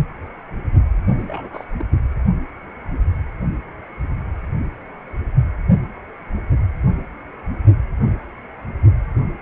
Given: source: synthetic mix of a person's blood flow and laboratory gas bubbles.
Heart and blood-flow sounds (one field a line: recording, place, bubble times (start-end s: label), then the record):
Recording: Doppler ultrasound of blood flow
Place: precordium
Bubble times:
1.18-1.65 s: bubbles
1.77-1.84 s: bubbles
From the record:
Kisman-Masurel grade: 211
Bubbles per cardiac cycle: several, 3 to 8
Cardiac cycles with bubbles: 1 to 10%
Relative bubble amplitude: barely perceptible (0.100 to 0.250)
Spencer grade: 1 (occasional bubble signal discernible with the cardiac motion signal, with majority of cardiac periods free of bubbles)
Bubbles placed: anywhere in the cardiac cycle